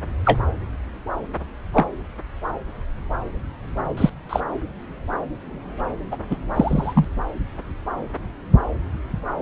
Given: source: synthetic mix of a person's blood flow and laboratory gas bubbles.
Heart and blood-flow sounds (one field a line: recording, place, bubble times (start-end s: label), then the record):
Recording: Doppler ultrasound of blood flow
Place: subclavian vein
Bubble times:
0.24-0.39 s: bubbles
1.73-1.85 s: bubbles
3.97-4.09 s: bubbles
4.29-4.41 s: bubbles
6.11-6.17 s: bubbles
6.30-6.37 s: bubbles
6.54-7.05 s: bubbles
From the record:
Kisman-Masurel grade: 123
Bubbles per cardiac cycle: 1 to 2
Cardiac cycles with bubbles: 10 to 50%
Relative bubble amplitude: loud (0.450 to 0.775)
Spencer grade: 2 (many but less than half of the cardiac periods contain bubble signals, singularly or in groups)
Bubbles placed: anywhere in the cardiac cycle